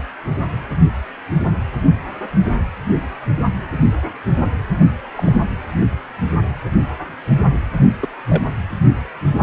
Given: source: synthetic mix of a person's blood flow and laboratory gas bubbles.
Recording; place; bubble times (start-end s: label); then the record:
Doppler ultrasound of blood flow; precordium
5.16-5.37 s: bubbles
8.02-8.08 s: bubbles
8.28-8.43 s: bubbles
From the record:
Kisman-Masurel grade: 122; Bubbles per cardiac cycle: 1 to 2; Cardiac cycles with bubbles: 10 to 50%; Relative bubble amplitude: moderate (0.250 to 0.450); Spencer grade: 2 (many but less than half of the cardiac periods contain bubble signals, singularly or in groups); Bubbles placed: anywhere in the cardiac cycle